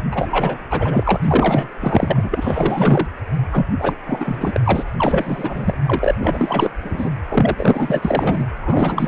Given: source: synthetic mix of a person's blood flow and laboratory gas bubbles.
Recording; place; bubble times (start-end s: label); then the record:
Doppler ultrasound of blood flow; precordium
0.00-0.04 s: bubbles
0.11-0.58 s: bubbles
0.70-1.20 s: bubbles
1.22-1.69 s: bubbles
1.80-3.08 s: bubbles
3.52-3.67 s: bubbles
3.79-3.94 s: bubbles
4.06-4.60 s: bubbles
4.64-4.84 s: bubbles
4.97-5.78 s: bubbles
5.85-6.14 s: bubbles
6.20-6.70 s: bubbles
6.82-7.10 s: bubbles
7.29-8.47 s: bubbles
8.61-9.08 s: bubbles
From the record:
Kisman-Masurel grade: 444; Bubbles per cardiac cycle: continuous sound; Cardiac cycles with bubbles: 100%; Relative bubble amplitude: maximal (0.775 to 0.999); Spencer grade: 4 (maximum detectable bubble signal sounding continuously throughout systole and diastole of every cardiac period, and overriding the amplitude of the normal cardiac signals); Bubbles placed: anywhere in the cardiac cycle